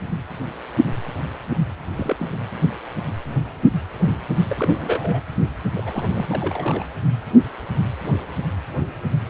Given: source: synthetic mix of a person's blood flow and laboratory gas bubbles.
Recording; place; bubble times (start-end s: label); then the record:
Doppler ultrasound of blood flow; precordium
1.96-2.16 s: bubbles
2.19-2.25 s: bubbles
4.48-5.21 s: bubbles
5.74-6.09 s: bubbles
6.13-6.26 s: bubbles
6.29-6.84 s: bubbles
From the record:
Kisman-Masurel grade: 221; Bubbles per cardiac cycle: several, 3 to 8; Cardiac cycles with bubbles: 10 to 50%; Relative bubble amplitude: barely perceptible (0.100 to 0.250); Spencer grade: 2 (many but less than half of the cardiac periods contain bubble signals, singularly or in groups); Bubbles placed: anywhere in the cardiac cycle